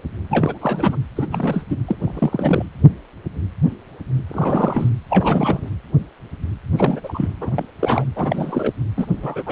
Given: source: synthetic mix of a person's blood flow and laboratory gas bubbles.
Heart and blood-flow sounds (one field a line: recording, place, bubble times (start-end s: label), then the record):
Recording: Doppler ultrasound of blood flow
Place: precordium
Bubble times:
0.30-0.58 s: bubbles
0.61-0.96 s: bubbles
1.16-1.27 s: bubbles
1.31-1.64 s: bubbles
1.69-1.77 s: bubbles
1.87-1.96 s: bubbles
2.02-2.65 s: bubbles
4.29-4.90 s: bubbles
5.09-5.68 s: bubbles
6.76-7.00 s: bubbles
7.03-7.33 s: bubbles
7.40-7.50 s: bubbles
7.54-7.65 s: bubbles
7.79-8.04 s: bubbles
8.15-8.73 s: bubbles
8.96-9.43 s: bubbles
9.46-9.52 s: bubbles
From the record:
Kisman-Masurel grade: 332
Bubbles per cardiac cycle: rolling drumbeat, 9 or more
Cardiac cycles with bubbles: 50 to 99%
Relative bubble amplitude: moderate (0.250 to 0.450)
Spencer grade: 3 (all of the cardiac periods contain showers or single bubble signals, but not dominating or overriding the cardiac motion signals)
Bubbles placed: anywhere in the cardiac cycle